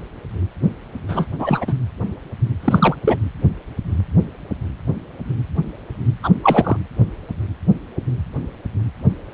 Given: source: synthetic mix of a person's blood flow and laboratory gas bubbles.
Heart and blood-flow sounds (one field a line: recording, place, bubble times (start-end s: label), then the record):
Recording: Doppler ultrasound of blood flow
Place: precordium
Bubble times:
1.08-1.27 s: bubbles
1.39-1.73 s: bubbles
2.60-2.96 s: bubbles
3.04-3.17 s: bubbles
6.23-6.30 s: bubbles
6.43-6.77 s: bubbles
From the record:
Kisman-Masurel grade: 223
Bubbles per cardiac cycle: several, 3 to 8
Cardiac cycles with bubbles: 10 to 50%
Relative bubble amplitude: loud (0.450 to 0.775)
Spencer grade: 2 (many but less than half of the cardiac periods contain bubble signals, singularly or in groups)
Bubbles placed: anywhere in the cardiac cycle